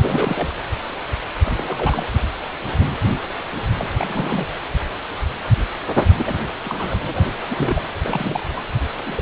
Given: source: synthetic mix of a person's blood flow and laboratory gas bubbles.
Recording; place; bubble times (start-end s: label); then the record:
Doppler ultrasound of blood flow; precordium
0.00-0.49 s: bubbles
1.43-2.04 s: bubbles
3.79-4.46 s: bubbles
6.16-6.37 s: bubbles
6.64-7.28 s: bubbles
7.50-7.82 s: bubbles
8.02-8.43 s: bubbles
8.48-8.64 s: bubbles
9.06-9.22 s: bubbles
From the record:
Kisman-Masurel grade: 332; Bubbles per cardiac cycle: rolling drumbeat, 9 or more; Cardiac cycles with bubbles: 50 to 99%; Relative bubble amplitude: moderate (0.250 to 0.450); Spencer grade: 3 (all of the cardiac periods contain showers or single bubble signals, but not dominating or overriding the cardiac motion signals); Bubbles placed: anywhere in the cardiac cycle